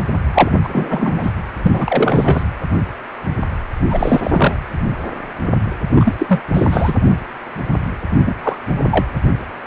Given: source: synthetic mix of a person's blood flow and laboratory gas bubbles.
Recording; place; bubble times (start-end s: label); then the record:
Doppler ultrasound of blood flow; precordium
0.34-0.51 s: bubbles
0.63-1.31 s: bubbles
1.59-2.43 s: bubbles
3.90-4.21 s: bubbles
4.23-4.31 s: bubbles
4.33-4.57 s: bubbles
5.95-6.15 s: bubbles
6.19-6.42 s: bubbles
6.54-6.94 s: bubbles
8.25-8.34 s: bubbles
8.43-8.56 s: bubbles
8.76-8.88 s: bubbles
8.91-9.05 s: bubbles
From the record:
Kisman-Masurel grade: 223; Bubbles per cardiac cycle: several, 3 to 8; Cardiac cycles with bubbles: 10 to 50%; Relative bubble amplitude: loud (0.450 to 0.775); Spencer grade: 2 (many but less than half of the cardiac periods contain bubble signals, singularly or in groups); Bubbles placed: anywhere in the cardiac cycle